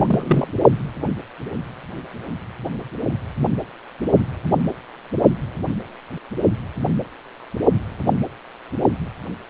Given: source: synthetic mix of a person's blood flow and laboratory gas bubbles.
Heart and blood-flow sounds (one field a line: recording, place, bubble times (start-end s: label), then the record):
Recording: Doppler ultrasound of blood flow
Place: precordium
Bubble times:
0.00-0.53 s: bubbles
From the record:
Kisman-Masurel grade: 212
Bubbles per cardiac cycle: several, 3 to 8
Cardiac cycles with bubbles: 1 to 10%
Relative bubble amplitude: moderate (0.250 to 0.450)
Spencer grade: 1 (occasional bubble signal discernible with the cardiac motion signal, with majority of cardiac periods free of bubbles)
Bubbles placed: only in the low amplitude regions of the cardiac cycle